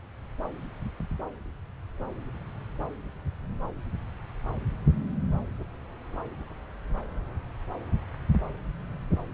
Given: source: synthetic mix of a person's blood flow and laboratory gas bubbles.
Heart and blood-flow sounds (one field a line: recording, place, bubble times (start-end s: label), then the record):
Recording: Doppler ultrasound of blood flow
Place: subclavian vein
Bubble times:
no bubbles
From the record:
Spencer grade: 0 (complete lack of bubble signals)